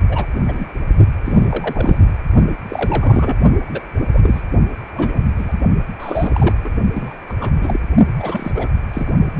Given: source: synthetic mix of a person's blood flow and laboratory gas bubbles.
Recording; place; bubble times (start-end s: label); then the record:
Doppler ultrasound of blood flow; precordium
0.09-0.26 s: bubbles
0.47-0.65 s: bubbles
1.25-2.01 s: bubbles
2.69-3.37 s: bubbles
3.68-3.82 s: bubbles
4.13-4.42 s: bubbles
4.94-5.24 s: bubbles
5.38-5.60 s: bubbles
6.00-6.56 s: bubbles
6.62-6.71 s: bubbles
6.93-7.16 s: bubbles
7.29-7.33 s: bubbles
7.40-7.52 s: bubbles
7.56-7.79 s: bubbles
8.19-8.52 s: bubbles
8.54-8.70 s: bubbles
8.93-9.10 s: bubbles
9.37-9.40 s: bubbles
From the record:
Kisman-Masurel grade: 242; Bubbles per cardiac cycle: several, 3 to 8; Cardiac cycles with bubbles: 100%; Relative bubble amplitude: moderate (0.250 to 0.450); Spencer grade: 3 (all of the cardiac periods contain showers or single bubble signals, but not dominating or overriding the cardiac motion signals); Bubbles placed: only in the low amplitude regions of the cardiac cycle